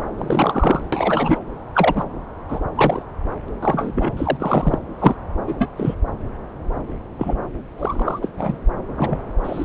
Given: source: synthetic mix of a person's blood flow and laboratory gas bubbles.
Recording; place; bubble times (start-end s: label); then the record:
Doppler ultrasound of blood flow; subclavian vein
0.18-0.83 s: bubbles
0.92-1.39 s: bubbles
1.75-2.05 s: bubbles
2.48-2.59 s: bubbles
2.75-3.02 s: bubbles
3.62-4.12 s: bubbles
4.17-4.79 s: bubbles
4.99-5.16 s: bubbles
5.47-5.56 s: bubbles
5.58-5.70 s: bubbles
5.77-5.95 s: bubbles
7.18-7.37 s: bubbles
7.78-8.29 s: bubbles
8.37-8.58 s: bubbles
8.97-9.19 s: bubbles
9.44-9.64 s: bubbles
From the record:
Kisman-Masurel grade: 232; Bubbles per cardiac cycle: several, 3 to 8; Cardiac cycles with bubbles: 50 to 99%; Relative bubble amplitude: moderate (0.250 to 0.450); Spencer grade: 3 (all of the cardiac periods contain showers or single bubble signals, but not dominating or overriding the cardiac motion signals); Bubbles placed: anywhere in the cardiac cycle